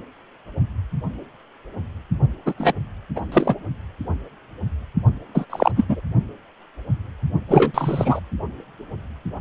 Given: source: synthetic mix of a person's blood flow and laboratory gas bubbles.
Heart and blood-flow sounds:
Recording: Doppler ultrasound of blood flow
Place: precordium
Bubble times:
2.46-2.54 s: bubbles
2.58-2.73 s: bubbles
3.16-3.20 s: bubbles
3.31-3.56 s: bubbles
5.34-5.46 s: bubbles
5.50-5.71 s: bubbles
5.75-5.84 s: bubbles
5.89-6.00 s: bubbles
7.48-7.71 s: bubbles
7.74-8.20 s: bubbles
From the record:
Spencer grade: 2 (many but less than half of the cardiac periods contain bubble signals, singularly or in groups)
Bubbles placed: only in the low amplitude regions of the cardiac cycle

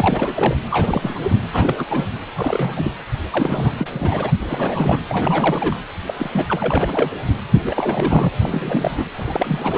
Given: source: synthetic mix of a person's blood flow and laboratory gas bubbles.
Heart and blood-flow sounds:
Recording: Doppler ultrasound of blood flow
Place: precordium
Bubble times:
0.00-0.56 s: bubbles
0.70-1.19 s: bubbles
1.23-1.37 s: bubbles
1.53-1.85 s: bubbles
1.90-2.06 s: bubbles
2.35-2.92 s: bubbles
3.29-3.71 s: bubbles
3.78-3.88 s: bubbles
3.92-4.31 s: bubbles
4.42-5.00 s: bubbles
5.09-5.79 s: bubbles
6.07-6.14 s: bubbles
6.17-6.30 s: bubbles
6.33-7.11 s: bubbles
7.63-8.29 s: bubbles
8.41-9.07 s: bubbles
9.15-9.77 s: bubbles
From the record:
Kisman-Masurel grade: 342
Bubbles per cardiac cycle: rolling drumbeat, 9 or more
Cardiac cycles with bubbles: 100%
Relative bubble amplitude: moderate (0.250 to 0.450)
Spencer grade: 3 (all of the cardiac periods contain showers or single bubble signals, but not dominating or overriding the cardiac motion signals)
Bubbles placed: anywhere in the cardiac cycle

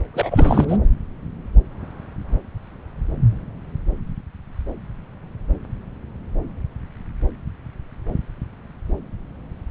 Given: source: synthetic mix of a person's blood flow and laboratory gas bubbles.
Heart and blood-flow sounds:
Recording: Doppler ultrasound of blood flow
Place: subclavian vein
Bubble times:
0.14-0.65 s: bubbles
0.68-0.78 s: bubbles
From the record:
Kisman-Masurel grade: 222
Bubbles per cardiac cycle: several, 3 to 8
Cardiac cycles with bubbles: 10 to 50%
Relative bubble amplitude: moderate (0.250 to 0.450)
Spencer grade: 2 (many but less than half of the cardiac periods contain bubble signals, singularly or in groups)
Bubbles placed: anywhere in the cardiac cycle

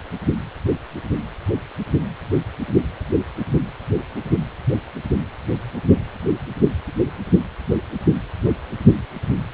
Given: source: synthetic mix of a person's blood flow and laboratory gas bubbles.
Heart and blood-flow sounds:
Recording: Doppler ultrasound of blood flow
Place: precordium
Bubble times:
no bubbles
From the record:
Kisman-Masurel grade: 000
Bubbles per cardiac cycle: 0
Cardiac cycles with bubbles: 0%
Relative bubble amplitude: no bubbles discernible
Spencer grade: 0 (complete lack of bubble signals)

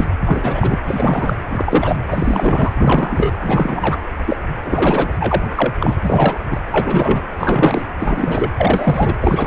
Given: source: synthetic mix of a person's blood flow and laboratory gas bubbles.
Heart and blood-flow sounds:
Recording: Doppler ultrasound of blood flow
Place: precordium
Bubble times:
0.00-0.07 s: bubbles
0.26-0.79 s: bubbles
0.85-1.35 s: bubbles
1.50-2.02 s: bubbles
2.10-2.73 s: bubbles
2.75-3.34 s: bubbles
3.42-4.04 s: bubbles
4.26-4.38 s: bubbles
4.63-5.13 s: bubbles
5.20-5.74 s: bubbles
5.80-5.99 s: bubbles
6.03-6.39 s: bubbles
6.50-6.61 s: bubbles
6.71-7.22 s: bubbles
7.33-7.83 s: bubbles
7.99-8.52 s: bubbles
8.57-9.13 s: bubbles
9.21-9.47 s: bubbles
From the record:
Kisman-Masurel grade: 343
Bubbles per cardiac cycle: rolling drumbeat, 9 or more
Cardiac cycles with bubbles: 100%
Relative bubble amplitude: loud (0.450 to 0.775)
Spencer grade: 3 (all of the cardiac periods contain showers or single bubble signals, but not dominating or overriding the cardiac motion signals)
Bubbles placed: anywhere in the cardiac cycle

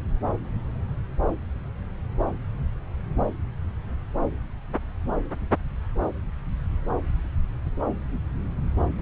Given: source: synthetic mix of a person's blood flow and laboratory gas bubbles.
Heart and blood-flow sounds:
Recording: Doppler ultrasound of blood flow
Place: subclavian vein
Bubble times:
no bubbles
From the record:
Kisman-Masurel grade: 000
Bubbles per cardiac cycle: 0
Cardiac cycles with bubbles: 0%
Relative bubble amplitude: no bubbles discernible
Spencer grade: 0 (complete lack of bubble signals)

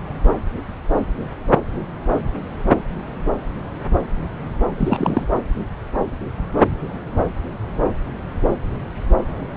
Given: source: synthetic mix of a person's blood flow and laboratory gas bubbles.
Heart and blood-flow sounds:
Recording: Doppler ultrasound of blood flow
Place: subclavian vein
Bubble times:
4.77-5.25 s: bubbles
From the record:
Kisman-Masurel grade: 212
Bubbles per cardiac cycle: several, 3 to 8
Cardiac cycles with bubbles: 1 to 10%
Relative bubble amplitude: moderate (0.250 to 0.450)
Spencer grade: 1 (occasional bubble signal discernible with the cardiac motion signal, with majority of cardiac periods free of bubbles)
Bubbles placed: anywhere in the cardiac cycle

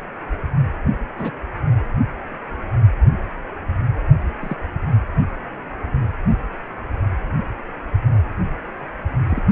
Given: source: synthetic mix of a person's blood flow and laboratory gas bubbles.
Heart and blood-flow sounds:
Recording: Doppler ultrasound of blood flow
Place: precordium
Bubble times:
1.18-1.31 s: bubbles
4.41-4.55 s: bubbles
9.29-9.42 s: bubbles
From the record:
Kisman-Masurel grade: 121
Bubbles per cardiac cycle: 1 to 2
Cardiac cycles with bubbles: 10 to 50%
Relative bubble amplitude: barely perceptible (0.100 to 0.250)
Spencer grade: 2 (many but less than half of the cardiac periods contain bubble signals, singularly or in groups)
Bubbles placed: only in the low amplitude regions of the cardiac cycle

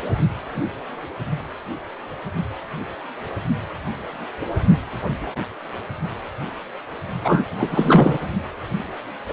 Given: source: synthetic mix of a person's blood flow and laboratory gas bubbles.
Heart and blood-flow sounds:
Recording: Doppler ultrasound of blood flow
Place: precordium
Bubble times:
7.24-7.45 s: bubbles
7.58-8.18 s: bubbles
From the record:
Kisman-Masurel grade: 223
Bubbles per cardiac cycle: several, 3 to 8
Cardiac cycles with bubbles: 10 to 50%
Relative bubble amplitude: loud (0.450 to 0.775)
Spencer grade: 2 (many but less than half of the cardiac periods contain bubble signals, singularly or in groups)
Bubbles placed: only in the low amplitude regions of the cardiac cycle

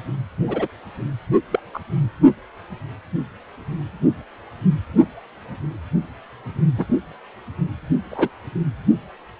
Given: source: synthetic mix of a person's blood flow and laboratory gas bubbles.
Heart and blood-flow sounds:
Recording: Doppler ultrasound of blood flow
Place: precordium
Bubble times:
0.47-0.68 s: bubbles
1.51-1.59 s: bubbles
1.73-1.78 s: bubbles
6.78-6.86 s: bubbles
8.11-8.29 s: bubbles
From the record:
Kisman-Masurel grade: 122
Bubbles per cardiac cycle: 1 to 2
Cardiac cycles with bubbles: 10 to 50%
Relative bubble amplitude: moderate (0.250 to 0.450)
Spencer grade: 2 (many but less than half of the cardiac periods contain bubble signals, singularly or in groups)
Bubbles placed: only in the low amplitude regions of the cardiac cycle

